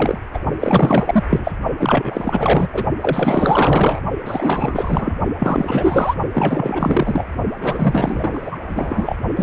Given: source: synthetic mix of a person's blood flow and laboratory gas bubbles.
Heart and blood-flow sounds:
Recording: Doppler ultrasound of blood flow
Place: precordium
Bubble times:
0.00-0.21 s: bubbles
0.34-0.39 s: bubbles
0.59-1.23 s: bubbles
1.29-1.51 s: bubbles
1.79-2.69 s: bubbles
2.73-2.85 s: bubbles
3.01-4.00 s: bubbles
4.25-5.15 s: bubbles
5.39-6.14 s: bubbles
6.31-7.25 s: bubbles
7.60-8.57 s: bubbles
8.68-9.16 s: bubbles
9.36-9.43 s: bubbles
From the record:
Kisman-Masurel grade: 444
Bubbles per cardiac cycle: continuous sound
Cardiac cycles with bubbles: 100%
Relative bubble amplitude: maximal (0.775 to 0.999)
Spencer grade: 4 (maximum detectable bubble signal sounding continuously throughout systole and diastole of every cardiac period, and overriding the amplitude of the normal cardiac signals)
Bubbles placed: only in the low amplitude regions of the cardiac cycle

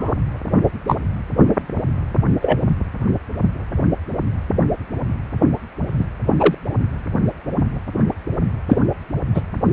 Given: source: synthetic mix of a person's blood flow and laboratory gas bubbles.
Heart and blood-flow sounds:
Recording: Doppler ultrasound of blood flow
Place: precordium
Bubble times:
0.00-0.13 s: bubbles
0.88-0.96 s: bubbles
2.42-2.58 s: bubbles
5.99-6.04 s: bubbles
6.39-6.55 s: bubbles
8.68-8.79 s: bubbles
9.35-9.41 s: bubbles
From the record:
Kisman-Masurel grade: 123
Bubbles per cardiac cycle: 1 to 2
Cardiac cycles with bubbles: 10 to 50%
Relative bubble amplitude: loud (0.450 to 0.775)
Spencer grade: 2 (many but less than half of the cardiac periods contain bubble signals, singularly or in groups)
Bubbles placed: anywhere in the cardiac cycle

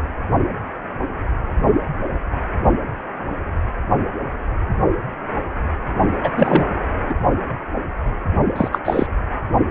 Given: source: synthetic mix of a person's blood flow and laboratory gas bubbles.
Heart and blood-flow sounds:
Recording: Doppler ultrasound of blood flow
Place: precordium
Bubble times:
6.23-6.30 s: bubbles
6.37-6.64 s: bubbles
7.09-7.14 s: bubbles
8.55-8.68 s: bubbles
8.71-8.79 s: bubbles
8.84-9.06 s: bubbles
From the record:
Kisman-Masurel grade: 223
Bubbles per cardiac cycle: several, 3 to 8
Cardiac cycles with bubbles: 10 to 50%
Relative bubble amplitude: loud (0.450 to 0.775)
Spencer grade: 2 (many but less than half of the cardiac periods contain bubble signals, singularly or in groups)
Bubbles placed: only in the low amplitude regions of the cardiac cycle

